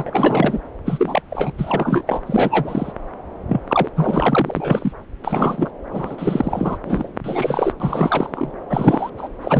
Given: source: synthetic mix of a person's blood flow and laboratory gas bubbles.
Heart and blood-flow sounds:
Doppler ultrasound of blood flow; subclavian vein
0.00-0.60 s: bubbles
0.85-1.22 s: bubbles
1.30-1.52 s: bubbles
1.57-2.03 s: bubbles
2.06-2.21 s: bubbles
2.26-2.93 s: bubbles
3.49-3.61 s: bubbles
3.68-3.89 s: bubbles
3.96-4.92 s: bubbles
5.24-5.71 s: bubbles
5.91-6.77 s: bubbles
6.84-7.17 s: bubbles
7.24-7.73 s: bubbles
7.80-8.53 s: bubbles
8.69-9.10 s: bubbles
9.18-9.29 s: bubbles
9.41-9.60 s: bubbles
From the record:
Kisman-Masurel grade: 342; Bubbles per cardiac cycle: rolling drumbeat, 9 or more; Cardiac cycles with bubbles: 100%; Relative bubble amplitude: moderate (0.250 to 0.450); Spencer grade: 3 (all of the cardiac periods contain showers or single bubble signals, but not dominating or overriding the cardiac motion signals); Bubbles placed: anywhere in the cardiac cycle

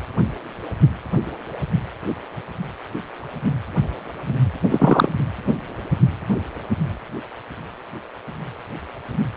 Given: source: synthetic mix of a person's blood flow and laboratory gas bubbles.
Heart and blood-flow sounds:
Doppler ultrasound of blood flow; precordium
4.70-5.08 s: bubbles
From the record:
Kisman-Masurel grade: 113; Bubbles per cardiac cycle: 1 to 2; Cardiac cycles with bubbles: 1 to 10%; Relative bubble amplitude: loud (0.450 to 0.775); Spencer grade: 1 (occasional bubble signal discernible with the cardiac motion signal, with majority of cardiac periods free of bubbles); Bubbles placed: anywhere in the cardiac cycle

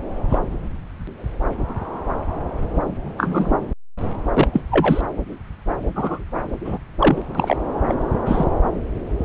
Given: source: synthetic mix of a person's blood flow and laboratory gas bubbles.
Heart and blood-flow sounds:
Doppler ultrasound of blood flow; subclavian vein
0.29-0.39 s: bubbles
3.17-3.52 s: bubbles
4.33-4.47 s: bubbles
4.53-4.61 s: bubbles
4.71-5.01 s: bubbles
5.95-6.24 s: bubbles
6.64-6.78 s: bubbles
6.99-7.22 s: bubbles
7.34-7.56 s: bubbles
7.88-7.96 s: bubbles
8.25-8.46 s: bubbles
From the record:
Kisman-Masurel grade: 123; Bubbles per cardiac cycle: 1 to 2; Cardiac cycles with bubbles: 10 to 50%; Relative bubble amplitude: loud (0.450 to 0.775); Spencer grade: 2 (many but less than half of the cardiac periods contain bubble signals, singularly or in groups); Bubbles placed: anywhere in the cardiac cycle

